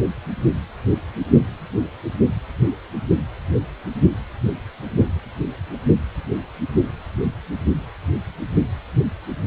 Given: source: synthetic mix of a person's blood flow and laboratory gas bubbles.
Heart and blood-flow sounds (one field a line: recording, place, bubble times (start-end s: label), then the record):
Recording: Doppler ultrasound of blood flow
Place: precordium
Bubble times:
no bubbles
From the record:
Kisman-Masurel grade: 000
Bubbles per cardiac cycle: 0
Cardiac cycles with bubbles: 0%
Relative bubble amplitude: no bubbles discernible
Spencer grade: 0 (complete lack of bubble signals)